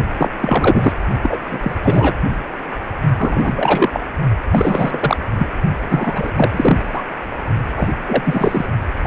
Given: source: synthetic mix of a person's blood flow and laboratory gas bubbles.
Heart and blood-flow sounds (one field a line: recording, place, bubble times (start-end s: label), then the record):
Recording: Doppler ultrasound of blood flow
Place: precordium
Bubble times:
0.17-0.30 s: bubbles
0.40-0.93 s: bubbles
1.22-1.38 s: bubbles
1.51-1.76 s: bubbles
1.83-2.14 s: bubbles
2.24-2.36 s: bubbles
3.17-4.00 s: bubbles
4.52-5.17 s: bubbles
5.38-5.47 s: bubbles
5.89-6.31 s: bubbles
6.36-6.86 s: bubbles
6.91-7.03 s: bubbles
7.76-7.88 s: bubbles
8.06-8.68 s: bubbles
9.02-9.07 s: bubbles
From the record:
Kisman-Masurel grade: 343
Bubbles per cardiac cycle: rolling drumbeat, 9 or more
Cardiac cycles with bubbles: 100%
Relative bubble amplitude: loud (0.450 to 0.775)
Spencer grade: 3 (all of the cardiac periods contain showers or single bubble signals, but not dominating or overriding the cardiac motion signals)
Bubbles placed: only in the low amplitude regions of the cardiac cycle